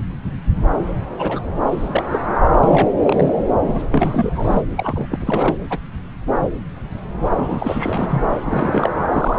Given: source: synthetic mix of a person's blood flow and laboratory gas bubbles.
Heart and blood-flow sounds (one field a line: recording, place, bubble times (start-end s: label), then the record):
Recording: Doppler ultrasound of blood flow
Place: subclavian vein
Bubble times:
1.18-1.40 s: bubbles
1.71-2.19 s: bubbles
2.63-2.90 s: bubbles
3.04-3.33 s: bubbles
3.67-3.80 s: bubbles
3.91-4.62 s: bubbles
4.77-5.07 s: bubbles
5.10-5.57 s: bubbles
5.70-5.79 s: bubbles
7.35-8.22 s: bubbles
8.45-8.90 s: bubbles
9.14-9.37 s: bubbles
From the record:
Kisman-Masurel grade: 332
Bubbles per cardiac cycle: rolling drumbeat, 9 or more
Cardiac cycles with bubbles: 50 to 99%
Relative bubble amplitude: moderate (0.250 to 0.450)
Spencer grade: 3 (all of the cardiac periods contain showers or single bubble signals, but not dominating or overriding the cardiac motion signals)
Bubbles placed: anywhere in the cardiac cycle